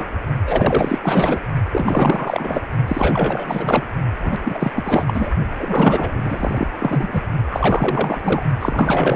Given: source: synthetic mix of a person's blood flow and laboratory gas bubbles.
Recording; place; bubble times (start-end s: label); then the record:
Doppler ultrasound of blood flow; precordium
0.00-0.05 s: bubbles
0.47-0.98 s: bubbles
1.02-1.39 s: bubbles
1.71-2.61 s: bubbles
2.88-3.86 s: bubbles
4.23-4.38 s: bubbles
4.44-4.71 s: bubbles
4.75-5.04 s: bubbles
5.07-5.30 s: bubbles
5.59-6.67 s: bubbles
6.79-7.25 s: bubbles
7.50-8.21 s: bubbles
8.23-8.43 s: bubbles
8.60-9.16 s: bubbles
From the record:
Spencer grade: 4 (maximum detectable bubble signal sounding continuously throughout systole and diastole of every cardiac period, and overriding the amplitude of the normal cardiac signals); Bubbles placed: only in the low amplitude regions of the cardiac cycle